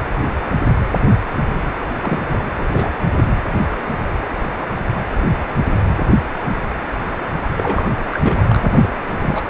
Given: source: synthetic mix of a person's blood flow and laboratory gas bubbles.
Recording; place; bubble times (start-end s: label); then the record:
Doppler ultrasound of blood flow; precordium
1.79-1.85 s: bubbles
2.00-2.20 s: bubbles
2.28-2.39 s: bubbles
2.56-2.66 s: bubbles
2.71-2.90 s: bubbles
3.15-3.25 s: bubbles
7.57-7.90 s: bubbles
8.12-8.96 s: bubbles
9.20-9.43 s: bubbles
From the record:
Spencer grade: 2 (many but less than half of the cardiac periods contain bubble signals, singularly or in groups); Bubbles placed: anywhere in the cardiac cycle